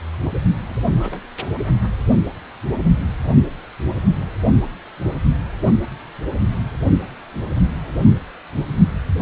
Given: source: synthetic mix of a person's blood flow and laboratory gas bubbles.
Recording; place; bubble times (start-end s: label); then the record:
Doppler ultrasound of blood flow; precordium
0.67-0.80 s: bubbles
0.96-1.19 s: bubbles
1.41-1.46 s: bubbles
From the record:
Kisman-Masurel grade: 221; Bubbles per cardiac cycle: several, 3 to 8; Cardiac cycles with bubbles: 10 to 50%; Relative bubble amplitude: barely perceptible (0.100 to 0.250); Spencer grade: 2 (many but less than half of the cardiac periods contain bubble signals, singularly or in groups); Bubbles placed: only in the low amplitude regions of the cardiac cycle